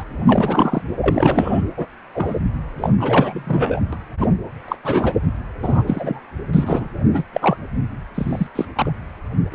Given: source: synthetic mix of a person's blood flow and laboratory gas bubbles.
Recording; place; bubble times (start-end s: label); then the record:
Doppler ultrasound of blood flow; precordium
0.00-0.04 s: bubbles
0.27-0.82 s: bubbles
1.01-1.62 s: bubbles
1.77-1.87 s: bubbles
2.13-2.40 s: bubbles
2.77-2.90 s: bubbles
2.98-3.81 s: bubbles
3.92-3.96 s: bubbles
4.19-4.28 s: bubbles
4.68-4.76 s: bubbles
4.83-5.14 s: bubbles
5.62-5.83 s: bubbles
5.87-6.21 s: bubbles
6.53-6.88 s: bubbles
7.13-7.24 s: bubbles
7.33-7.57 s: bubbles
8.14-8.47 s: bubbles
8.55-8.65 s: bubbles
8.75-8.91 s: bubbles
9.52-9.55 s: bubbles
From the record:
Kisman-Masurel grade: 243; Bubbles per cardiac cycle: several, 3 to 8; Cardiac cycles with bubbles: 100%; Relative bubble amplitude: loud (0.450 to 0.775); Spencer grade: 3 (all of the cardiac periods contain showers or single bubble signals, but not dominating or overriding the cardiac motion signals); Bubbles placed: anywhere in the cardiac cycle